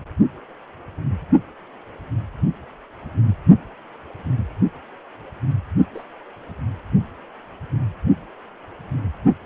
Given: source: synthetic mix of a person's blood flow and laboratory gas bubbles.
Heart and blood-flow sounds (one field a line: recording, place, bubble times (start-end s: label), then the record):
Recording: Doppler ultrasound of blood flow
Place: precordium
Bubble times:
5.95-6.04 s: bubbles
From the record:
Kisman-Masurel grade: 121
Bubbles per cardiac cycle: 1 to 2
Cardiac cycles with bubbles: 10 to 50%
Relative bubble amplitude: barely perceptible (0.100 to 0.250)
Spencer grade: 2 (many but less than half of the cardiac periods contain bubble signals, singularly or in groups)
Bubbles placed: only in the low amplitude regions of the cardiac cycle